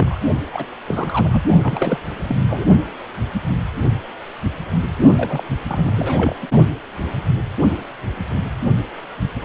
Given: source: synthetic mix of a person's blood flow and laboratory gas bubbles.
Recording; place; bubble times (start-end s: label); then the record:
Doppler ultrasound of blood flow; precordium
0.00-0.19 s: bubbles
0.53-0.65 s: bubbles
0.88-1.43 s: bubbles
1.62-1.99 s: bubbles
2.23-2.35 s: bubbles
2.48-2.66 s: bubbles
5.17-5.43 s: bubbles
5.67-6.34 s: bubbles
6.42-6.47 s: bubbles
From the record:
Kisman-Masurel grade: 332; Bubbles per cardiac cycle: rolling drumbeat, 9 or more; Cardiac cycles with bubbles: 50 to 99%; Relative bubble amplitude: moderate (0.250 to 0.450); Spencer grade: 3 (all of the cardiac periods contain showers or single bubble signals, but not dominating or overriding the cardiac motion signals); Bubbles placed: only in the low amplitude regions of the cardiac cycle